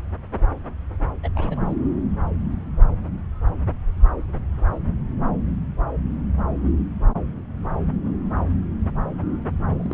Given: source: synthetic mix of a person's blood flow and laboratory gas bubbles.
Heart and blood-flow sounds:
Doppler ultrasound of blood flow; subclavian vein
1.22-1.28 s: bubbles
1.34-1.75 s: bubbles
9.79-9.93 s: bubbles
From the record:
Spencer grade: 1 (occasional bubble signal discernible with the cardiac motion signal, with majority of cardiac periods free of bubbles); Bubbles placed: anywhere in the cardiac cycle

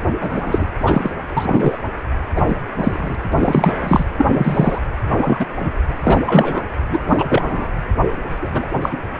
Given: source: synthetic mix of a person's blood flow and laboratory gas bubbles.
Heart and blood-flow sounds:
Doppler ultrasound of blood flow; precordium
0.21-0.67 s: bubbles
0.85-1.10 s: bubbles
1.36-1.80 s: bubbles
2.35-2.42 s: bubbles
2.48-2.55 s: bubbles
2.76-3.15 s: bubbles
3.32-3.73 s: bubbles
3.81-4.03 s: bubbles
4.18-4.79 s: bubbles
5.09-5.46 s: bubbles
5.60-5.70 s: bubbles
6.03-6.21 s: bubbles
6.25-6.63 s: bubbles
6.90-6.98 s: bubbles
7.08-7.71 s: bubbles
8.40-8.68 s: bubbles
8.81-8.98 s: bubbles
From the record:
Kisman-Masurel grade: 243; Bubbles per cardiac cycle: several, 3 to 8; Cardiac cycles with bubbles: 100%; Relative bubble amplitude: loud (0.450 to 0.775); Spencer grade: 3 (all of the cardiac periods contain showers or single bubble signals, but not dominating or overriding the cardiac motion signals); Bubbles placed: anywhere in the cardiac cycle

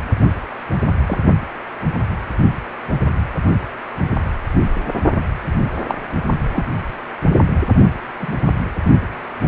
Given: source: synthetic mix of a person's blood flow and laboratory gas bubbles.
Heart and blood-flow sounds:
Doppler ultrasound of blood flow; precordium
1.06-1.19 s: bubbles
5.88-5.96 s: bubbles
6.53-6.65 s: bubbles
8.21-8.35 s: bubbles
From the record:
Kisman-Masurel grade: 122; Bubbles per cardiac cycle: 1 to 2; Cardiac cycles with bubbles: 10 to 50%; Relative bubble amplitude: moderate (0.250 to 0.450); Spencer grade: 2 (many but less than half of the cardiac periods contain bubble signals, singularly or in groups); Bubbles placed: only in the low amplitude regions of the cardiac cycle

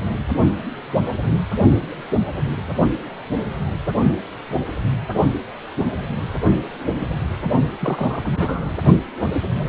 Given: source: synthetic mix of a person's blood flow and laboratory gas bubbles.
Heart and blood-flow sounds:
Doppler ultrasound of blood flow; precordium
7.79-8.71 s: bubbles
From the record:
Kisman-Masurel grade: 212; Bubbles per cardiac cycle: several, 3 to 8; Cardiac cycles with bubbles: 1 to 10%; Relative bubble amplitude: moderate (0.250 to 0.450); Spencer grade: 1 (occasional bubble signal discernible with the cardiac motion signal, with majority of cardiac periods free of bubbles); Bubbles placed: only in the low amplitude regions of the cardiac cycle

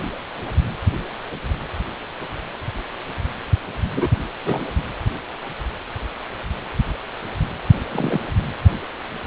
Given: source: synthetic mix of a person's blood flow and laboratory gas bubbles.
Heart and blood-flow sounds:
Doppler ultrasound of blood flow; precordium
3.95-4.08 s: bubbles
4.45-4.60 s: bubbles
7.92-8.21 s: bubbles
From the record:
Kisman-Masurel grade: 122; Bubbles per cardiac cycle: 1 to 2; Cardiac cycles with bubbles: 10 to 50%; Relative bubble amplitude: moderate (0.250 to 0.450); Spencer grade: 2 (many but less than half of the cardiac periods contain bubble signals, singularly or in groups); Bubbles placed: anywhere in the cardiac cycle

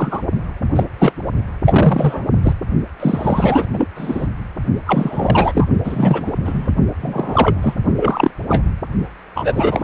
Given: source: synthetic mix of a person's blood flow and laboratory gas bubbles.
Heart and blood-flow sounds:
Doppler ultrasound of blood flow; precordium
0.00-0.20 s: bubbles
0.75-0.84 s: bubbles
0.98-1.12 s: bubbles
1.65-2.27 s: bubbles
2.43-2.53 s: bubbles
3.00-3.66 s: bubbles
3.73-3.88 s: bubbles
3.95-4.28 s: bubbles
4.86-5.67 s: bubbles
5.83-6.39 s: bubbles
6.45-6.72 s: bubbles
7.01-7.74 s: bubbles
7.96-8.30 s: bubbles
8.49-8.62 s: bubbles
9.35-9.84 s: bubbles
From the record:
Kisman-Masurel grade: 243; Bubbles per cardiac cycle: several, 3 to 8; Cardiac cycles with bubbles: 100%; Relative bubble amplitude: loud (0.450 to 0.775); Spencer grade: 3 (all of the cardiac periods contain showers or single bubble signals, but not dominating or overriding the cardiac motion signals); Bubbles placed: only in the low amplitude regions of the cardiac cycle

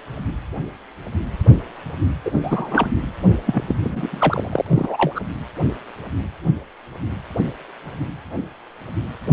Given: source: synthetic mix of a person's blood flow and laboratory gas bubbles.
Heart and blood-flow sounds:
Doppler ultrasound of blood flow; precordium
2.25-2.31 s: bubbles
2.42-2.86 s: bubbles
3.46-3.61 s: bubbles
3.68-3.75 s: bubbles
3.82-5.20 s: bubbles
From the record:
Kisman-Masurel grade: 223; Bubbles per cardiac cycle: several, 3 to 8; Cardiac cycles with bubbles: 10 to 50%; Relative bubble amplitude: loud (0.450 to 0.775); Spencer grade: 2 (many but less than half of the cardiac periods contain bubble signals, singularly or in groups); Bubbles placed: anywhere in the cardiac cycle

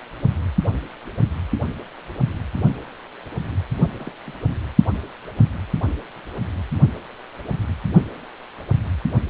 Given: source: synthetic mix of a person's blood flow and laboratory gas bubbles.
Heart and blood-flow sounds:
Doppler ultrasound of blood flow; precordium
3.97-4.11 s: bubbles
4.27-4.31 s: bubbles
From the record:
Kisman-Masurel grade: 111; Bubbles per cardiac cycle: 1 to 2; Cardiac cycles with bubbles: 1 to 10%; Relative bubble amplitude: barely perceptible (0.100 to 0.250); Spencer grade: 1 (occasional bubble signal discernible with the cardiac motion signal, with majority of cardiac periods free of bubbles); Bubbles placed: only in the low amplitude regions of the cardiac cycle

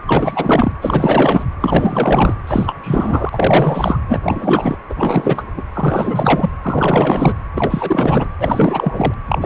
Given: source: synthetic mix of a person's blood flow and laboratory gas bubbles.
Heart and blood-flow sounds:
Doppler ultrasound of blood flow; precordium
0.07-0.72 s: bubbles
0.81-1.45 s: bubbles
1.60-2.37 s: bubbles
2.47-2.75 s: bubbles
2.81-3.99 s: bubbles
4.08-4.19 s: bubbles
4.22-4.76 s: bubbles
4.89-5.43 s: bubbles
5.57-5.63 s: bubbles
5.75-6.50 s: bubbles
6.62-7.33 s: bubbles
7.54-8.28 s: bubbles
8.39-9.14 s: bubbles
9.27-9.38 s: bubbles
9.41-9.46 s: bubbles
From the record:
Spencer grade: 4 (maximum detectable bubble signal sounding continuously throughout systole and diastole of every cardiac period, and overriding the amplitude of the normal cardiac signals); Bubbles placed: anywhere in the cardiac cycle

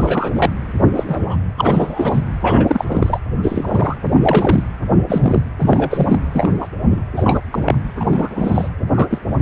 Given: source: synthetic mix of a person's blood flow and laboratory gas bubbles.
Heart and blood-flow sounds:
Doppler ultrasound of blood flow; precordium
0.00-0.50 s: bubbles
0.95-1.04 s: bubbles
1.06-1.36 s: bubbles
1.57-2.21 s: bubbles
2.41-3.20 s: bubbles
3.43-3.97 s: bubbles
4.02-4.08 s: bubbles
4.21-4.63 s: bubbles
4.88-5.03 s: bubbles
5.07-5.42 s: bubbles
5.59-6.19 s: bubbles
6.33-6.53 s: bubbles
6.60-6.68 s: bubbles
6.83-7.03 s: bubbles
7.17-7.39 s: bubbles
7.52-7.76 s: bubbles
7.99-8.69 s: bubbles
8.95-9.19 s: bubbles
From the record:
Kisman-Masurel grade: 243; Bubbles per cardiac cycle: several, 3 to 8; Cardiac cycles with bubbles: 100%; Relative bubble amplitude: loud (0.450 to 0.775); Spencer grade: 3 (all of the cardiac periods contain showers or single bubble signals, but not dominating or overriding the cardiac motion signals); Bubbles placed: anywhere in the cardiac cycle

